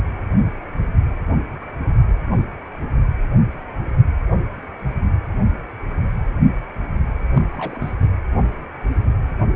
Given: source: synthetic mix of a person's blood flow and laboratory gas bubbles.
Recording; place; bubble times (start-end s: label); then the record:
Doppler ultrasound of blood flow; precordium
7.34-7.96 s: bubbles
From the record:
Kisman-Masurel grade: 211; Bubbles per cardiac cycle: several, 3 to 8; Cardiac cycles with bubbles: 1 to 10%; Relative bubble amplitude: barely perceptible (0.100 to 0.250); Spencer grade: 1 (occasional bubble signal discernible with the cardiac motion signal, with majority of cardiac periods free of bubbles); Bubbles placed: anywhere in the cardiac cycle